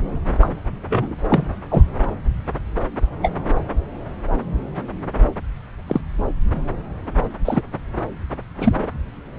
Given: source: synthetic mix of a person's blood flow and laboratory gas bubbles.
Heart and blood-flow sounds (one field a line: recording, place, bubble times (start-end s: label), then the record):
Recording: Doppler ultrasound of blood flow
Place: subclavian vein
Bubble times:
0.40-0.49 s: bubbles
0.89-1.15 s: bubbles
1.30-1.53 s: bubbles
1.70-1.82 s: bubbles
3.22-3.32 s: bubbles
5.88-6.01 s: bubbles
7.45-7.61 s: bubbles
8.60-8.75 s: bubbles
From the record:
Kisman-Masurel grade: 123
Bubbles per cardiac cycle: 1 to 2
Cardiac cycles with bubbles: 10 to 50%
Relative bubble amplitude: loud (0.450 to 0.775)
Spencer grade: 2 (many but less than half of the cardiac periods contain bubble signals, singularly or in groups)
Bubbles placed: anywhere in the cardiac cycle